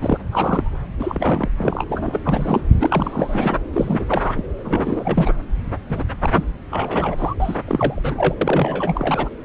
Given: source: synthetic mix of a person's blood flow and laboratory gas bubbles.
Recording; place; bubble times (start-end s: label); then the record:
Doppler ultrasound of blood flow; subclavian vein
0.01-0.18 s: bubbles
0.31-0.78 s: bubbles
0.99-1.49 s: bubbles
1.58-1.84 s: bubbles
1.89-2.19 s: bubbles
2.24-2.65 s: bubbles
2.79-3.57 s: bubbles
3.72-4.33 s: bubbles
4.37-4.43 s: bubbles
4.64-5.31 s: bubbles
5.88-6.04 s: bubbles
6.21-6.46 s: bubbles
6.71-7.35 s: bubbles
7.39-7.58 s: bubbles
7.67-8.36 s: bubbles
8.41-9.29 s: bubbles
From the record:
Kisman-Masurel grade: 342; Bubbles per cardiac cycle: rolling drumbeat, 9 or more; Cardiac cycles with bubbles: 100%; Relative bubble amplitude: moderate (0.250 to 0.450); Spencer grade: 3 (all of the cardiac periods contain showers or single bubble signals, but not dominating or overriding the cardiac motion signals); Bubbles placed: anywhere in the cardiac cycle